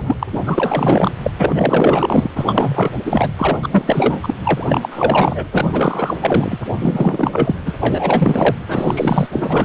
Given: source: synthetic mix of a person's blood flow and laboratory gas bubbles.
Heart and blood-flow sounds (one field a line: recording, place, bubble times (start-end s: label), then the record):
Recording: Doppler ultrasound of blood flow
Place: precordium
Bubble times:
0.00-0.17 s: bubbles
0.19-0.27 s: bubbles
0.32-0.41 s: bubbles
0.46-1.11 s: bubbles
1.23-1.31 s: bubbles
1.37-2.28 s: bubbles
2.35-2.94 s: bubbles
3.05-3.30 s: bubbles
3.38-4.20 s: bubbles
4.22-4.34 s: bubbles
4.44-4.65 s: bubbles
4.68-5.47 s: bubbles
5.51-6.58 s: bubbles
6.80-7.55 s: bubbles
7.66-7.75 s: bubbles
7.80-8.54 s: bubbles
8.68-9.29 s: bubbles
9.31-9.64 s: bubbles
From the record:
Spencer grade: 4 (maximum detectable bubble signal sounding continuously throughout systole and diastole of every cardiac period, and overriding the amplitude of the normal cardiac signals)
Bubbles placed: anywhere in the cardiac cycle